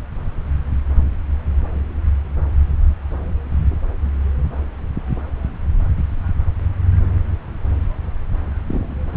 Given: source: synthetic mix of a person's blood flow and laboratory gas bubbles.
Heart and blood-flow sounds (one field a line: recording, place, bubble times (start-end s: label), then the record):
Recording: Doppler ultrasound of blood flow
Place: subclavian vein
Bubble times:
8.68-8.95 s: bubbles
From the record:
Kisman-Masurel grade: 111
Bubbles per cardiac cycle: 1 to 2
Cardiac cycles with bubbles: 1 to 10%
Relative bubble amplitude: barely perceptible (0.100 to 0.250)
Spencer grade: 1 (occasional bubble signal discernible with the cardiac motion signal, with majority of cardiac periods free of bubbles)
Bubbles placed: anywhere in the cardiac cycle